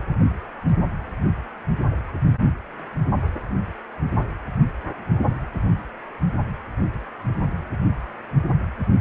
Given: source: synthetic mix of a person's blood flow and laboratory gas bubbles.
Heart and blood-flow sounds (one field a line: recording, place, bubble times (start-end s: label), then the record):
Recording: Doppler ultrasound of blood flow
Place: precordium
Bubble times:
no bubbles
From the record:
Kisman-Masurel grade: 000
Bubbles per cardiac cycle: 0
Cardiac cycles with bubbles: 0%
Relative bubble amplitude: no bubbles discernible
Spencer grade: 0 (complete lack of bubble signals)